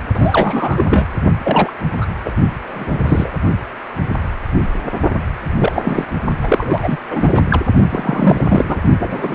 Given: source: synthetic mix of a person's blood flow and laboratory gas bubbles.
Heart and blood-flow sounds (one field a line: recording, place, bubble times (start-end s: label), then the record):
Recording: Doppler ultrasound of blood flow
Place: precordium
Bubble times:
0.00-0.02 s: bubbles
0.14-0.84 s: bubbles
0.89-1.07 s: bubbles
1.43-1.70 s: bubbles
2.00-2.06 s: bubbles
2.24-2.32 s: bubbles
2.67-3.31 s: bubbles
5.58-5.73 s: bubbles
5.75-6.05 s: bubbles
6.43-6.96 s: bubbles
7.10-7.46 s: bubbles
7.50-7.62 s: bubbles
7.89-8.82 s: bubbles
8.99-9.35 s: bubbles
From the record:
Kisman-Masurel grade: 233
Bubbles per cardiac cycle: several, 3 to 8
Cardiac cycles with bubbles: 50 to 99%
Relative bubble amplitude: loud (0.450 to 0.775)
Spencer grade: 3 (all of the cardiac periods contain showers or single bubble signals, but not dominating or overriding the cardiac motion signals)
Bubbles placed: only in the low amplitude regions of the cardiac cycle